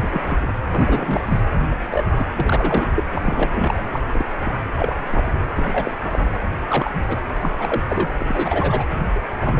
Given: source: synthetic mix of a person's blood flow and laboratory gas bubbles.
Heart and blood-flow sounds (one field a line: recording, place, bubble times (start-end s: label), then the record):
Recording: Doppler ultrasound of blood flow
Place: precordium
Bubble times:
0.00-0.53 s: bubbles
0.72-1.41 s: bubbles
1.55-1.60 s: bubbles
1.71-1.76 s: bubbles
1.92-2.03 s: bubbles
2.18-2.24 s: bubbles
2.35-2.87 s: bubbles
2.96-3.04 s: bubbles
3.13-3.80 s: bubbles
3.92-4.00 s: bubbles
4.14-4.25 s: bubbles
4.45-4.52 s: bubbles
4.77-4.96 s: bubbles
5.11-5.32 s: bubbles
5.57-5.66 s: bubbles
5.71-5.91 s: bubbles
6.03-6.39 s: bubbles
6.68-6.91 s: bubbles
7.07-7.19 s: bubbles
7.41-7.83 s: bubbles
7.89-8.14 s: bubbles
8.19-8.24 s: bubbles
8.27-8.85 s: bubbles
9.14-9.20 s: bubbles
9.39-9.59 s: bubbles
From the record:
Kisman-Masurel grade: 242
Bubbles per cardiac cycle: several, 3 to 8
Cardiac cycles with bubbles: 100%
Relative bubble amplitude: moderate (0.250 to 0.450)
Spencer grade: 3 (all of the cardiac periods contain showers or single bubble signals, but not dominating or overriding the cardiac motion signals)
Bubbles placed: anywhere in the cardiac cycle